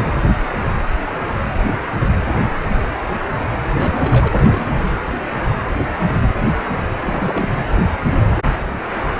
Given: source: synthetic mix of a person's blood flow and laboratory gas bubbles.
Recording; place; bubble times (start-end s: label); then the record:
Doppler ultrasound of blood flow; precordium
3.73-4.28 s: bubbles
4.30-4.72 s: bubbles
7.03-7.50 s: bubbles
From the record:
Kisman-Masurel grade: 221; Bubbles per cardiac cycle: several, 3 to 8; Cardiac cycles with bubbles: 10 to 50%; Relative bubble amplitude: barely perceptible (0.100 to 0.250); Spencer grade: 2 (many but less than half of the cardiac periods contain bubble signals, singularly or in groups); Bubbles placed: anywhere in the cardiac cycle